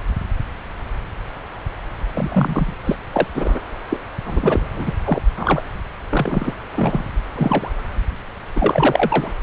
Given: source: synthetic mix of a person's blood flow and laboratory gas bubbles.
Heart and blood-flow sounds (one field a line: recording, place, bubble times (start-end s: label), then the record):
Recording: Doppler ultrasound of blood flow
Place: subclavian vein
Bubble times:
2.15-2.73 s: bubbles
2.84-2.96 s: bubbles
3.13-3.27 s: bubbles
3.34-3.60 s: bubbles
3.90-3.97 s: bubbles
4.25-4.93 s: bubbles
5.04-5.21 s: bubbles
5.37-5.61 s: bubbles
6.10-6.55 s: bubbles
6.73-7.08 s: bubbles
7.36-7.70 s: bubbles
8.56-9.34 s: bubbles
From the record:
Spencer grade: 3 (all of the cardiac periods contain showers or single bubble signals, but not dominating or overriding the cardiac motion signals)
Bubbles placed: anywhere in the cardiac cycle